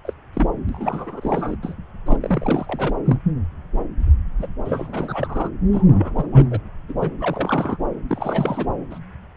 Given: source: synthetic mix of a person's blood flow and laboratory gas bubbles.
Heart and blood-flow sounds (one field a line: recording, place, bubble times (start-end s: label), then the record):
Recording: Doppler ultrasound of blood flow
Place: subclavian vein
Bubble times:
0.05-0.13 s: bubbles
0.33-0.48 s: bubbles
0.69-1.56 s: bubbles
1.62-1.75 s: bubbles
2.06-2.17 s: bubbles
2.20-2.94 s: bubbles
3.06-3.17 s: bubbles
4.40-4.47 s: bubbles
4.65-5.50 s: bubbles
5.72-6.26 s: bubbles
6.32-6.46 s: bubbles
6.50-6.59 s: bubbles
6.89-7.11 s: bubbles
7.20-7.78 s: bubbles
8.07-8.66 s: bubbles
8.90-8.98 s: bubbles
From the record:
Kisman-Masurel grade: 332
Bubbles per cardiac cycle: rolling drumbeat, 9 or more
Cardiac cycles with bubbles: 50 to 99%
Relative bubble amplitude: moderate (0.250 to 0.450)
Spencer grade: 3 (all of the cardiac periods contain showers or single bubble signals, but not dominating or overriding the cardiac motion signals)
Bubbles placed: anywhere in the cardiac cycle